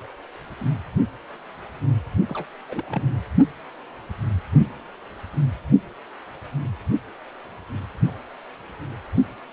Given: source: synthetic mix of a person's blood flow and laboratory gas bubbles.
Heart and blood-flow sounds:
Doppler ultrasound of blood flow; precordium
2.27-2.47 s: bubbles
2.69-2.84 s: bubbles
2.88-3.03 s: bubbles
From the record:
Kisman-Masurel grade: 211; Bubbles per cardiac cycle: several, 3 to 8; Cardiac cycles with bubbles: 1 to 10%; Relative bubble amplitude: barely perceptible (0.100 to 0.250); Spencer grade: 1 (occasional bubble signal discernible with the cardiac motion signal, with majority of cardiac periods free of bubbles); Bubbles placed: only in the low amplitude regions of the cardiac cycle

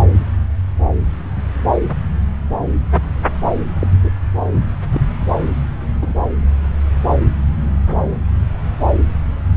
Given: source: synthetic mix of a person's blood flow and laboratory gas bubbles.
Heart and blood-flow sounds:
Doppler ultrasound of blood flow; subclavian vein
3.79-3.87 s: bubbles
4.04-4.11 s: bubbles
4.53-4.61 s: bubbles
4.92-5.00 s: bubbles
6.01-6.13 s: bubbles
From the record:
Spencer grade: 2 (many but less than half of the cardiac periods contain bubble signals, singularly or in groups); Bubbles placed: anywhere in the cardiac cycle

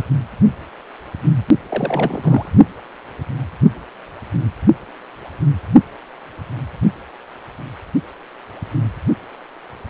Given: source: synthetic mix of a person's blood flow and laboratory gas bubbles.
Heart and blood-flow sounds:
Doppler ultrasound of blood flow; precordium
1.69-2.49 s: bubbles
From the record:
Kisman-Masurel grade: 212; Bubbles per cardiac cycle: several, 3 to 8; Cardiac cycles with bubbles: 1 to 10%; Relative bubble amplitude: moderate (0.250 to 0.450); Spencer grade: 1 (occasional bubble signal discernible with the cardiac motion signal, with majority of cardiac periods free of bubbles); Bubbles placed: only in the low amplitude regions of the cardiac cycle

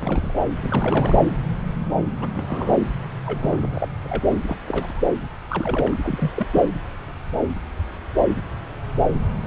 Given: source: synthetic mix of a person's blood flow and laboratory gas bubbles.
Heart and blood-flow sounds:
Doppler ultrasound of blood flow; subclavian vein
0.00-0.34 s: bubbles
0.62-1.21 s: bubbles
2.21-2.29 s: bubbles
2.34-2.83 s: bubbles
3.26-3.89 s: bubbles
4.04-4.23 s: bubbles
4.46-4.56 s: bubbles
4.65-5.03 s: bubbles
5.49-5.96 s: bubbles
6.07-6.31 s: bubbles
6.35-6.47 s: bubbles
6.54-6.63 s: bubbles
From the record:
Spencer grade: 3 (all of the cardiac periods contain showers or single bubble signals, but not dominating or overriding the cardiac motion signals); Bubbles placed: anywhere in the cardiac cycle

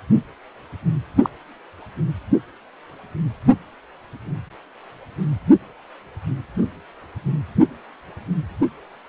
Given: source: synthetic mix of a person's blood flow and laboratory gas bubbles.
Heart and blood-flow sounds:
Doppler ultrasound of blood flow; precordium
1.23-1.30 s: bubbles
From the record:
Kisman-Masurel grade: 122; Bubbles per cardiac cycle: 1 to 2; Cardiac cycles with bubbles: 10 to 50%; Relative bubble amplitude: moderate (0.250 to 0.450); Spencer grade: 2 (many but less than half of the cardiac periods contain bubble signals, singularly or in groups); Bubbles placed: anywhere in the cardiac cycle

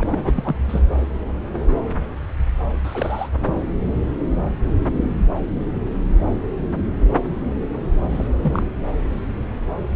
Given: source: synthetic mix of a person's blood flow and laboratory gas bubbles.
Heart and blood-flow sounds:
Doppler ultrasound of blood flow; subclavian vein
0.00-0.03 s: bubbles
0.11-0.55 s: bubbles
0.68-0.80 s: bubbles
2.83-3.29 s: bubbles
3.46-3.54 s: bubbles
8.09-8.28 s: bubbles
8.41-8.62 s: bubbles
From the record:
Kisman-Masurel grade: 222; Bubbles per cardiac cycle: several, 3 to 8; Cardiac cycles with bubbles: 10 to 50%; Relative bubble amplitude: moderate (0.250 to 0.450); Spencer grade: 2 (many but less than half of the cardiac periods contain bubble signals, singularly or in groups); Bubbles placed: anywhere in the cardiac cycle

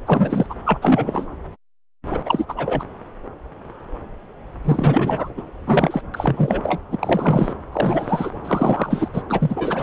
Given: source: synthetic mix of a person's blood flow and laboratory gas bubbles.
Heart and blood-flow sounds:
Doppler ultrasound of blood flow; subclavian vein
0.05-0.46 s: bubbles
0.49-0.54 s: bubbles
0.65-1.27 s: bubbles
2.11-2.19 s: bubbles
2.25-2.46 s: bubbles
2.48-2.84 s: bubbles
4.64-5.30 s: bubbles
5.37-5.42 s: bubbles
5.67-6.02 s: bubbles
6.14-6.79 s: bubbles
6.91-7.54 s: bubbles
7.72-8.31 s: bubbles
8.45-9.08 s: bubbles
9.13-9.22 s: bubbles
9.30-9.83 s: bubbles
From the record:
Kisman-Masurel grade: 333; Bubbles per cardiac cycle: rolling drumbeat, 9 or more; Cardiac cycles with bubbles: 50 to 99%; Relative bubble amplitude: loud (0.450 to 0.775); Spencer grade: 3 (all of the cardiac periods contain showers or single bubble signals, but not dominating or overriding the cardiac motion signals); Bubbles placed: anywhere in the cardiac cycle

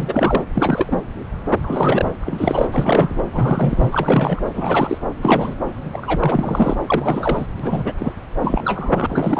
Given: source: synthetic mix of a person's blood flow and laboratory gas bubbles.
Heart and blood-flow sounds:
Doppler ultrasound of blood flow; subclavian vein
0.00-0.43 s: bubbles
0.54-1.03 s: bubbles
1.62-2.11 s: bubbles
2.23-2.68 s: bubbles
2.72-3.22 s: bubbles
3.33-4.42 s: bubbles
4.52-4.98 s: bubbles
5.21-5.54 s: bubbles
5.92-6.74 s: bubbles
6.86-7.46 s: bubbles
7.59-7.92 s: bubbles
7.98-8.12 s: bubbles
8.42-9.39 s: bubbles
From the record:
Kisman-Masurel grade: 333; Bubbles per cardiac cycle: rolling drumbeat, 9 or more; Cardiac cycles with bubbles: 50 to 99%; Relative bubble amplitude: loud (0.450 to 0.775); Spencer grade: 3 (all of the cardiac periods contain showers or single bubble signals, but not dominating or overriding the cardiac motion signals); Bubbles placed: anywhere in the cardiac cycle

